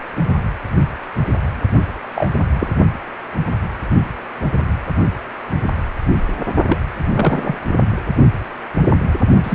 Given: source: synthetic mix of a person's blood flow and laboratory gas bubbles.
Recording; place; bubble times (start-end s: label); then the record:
Doppler ultrasound of blood flow; precordium
2.16-2.28 s: bubbles
2.54-2.68 s: bubbles
6.69-6.79 s: bubbles
7.04-7.55 s: bubbles
9.43-9.55 s: bubbles
From the record:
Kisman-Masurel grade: 122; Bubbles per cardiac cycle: 1 to 2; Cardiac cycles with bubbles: 10 to 50%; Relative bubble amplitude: moderate (0.250 to 0.450); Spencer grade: 2 (many but less than half of the cardiac periods contain bubble signals, singularly or in groups); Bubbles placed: only in the low amplitude regions of the cardiac cycle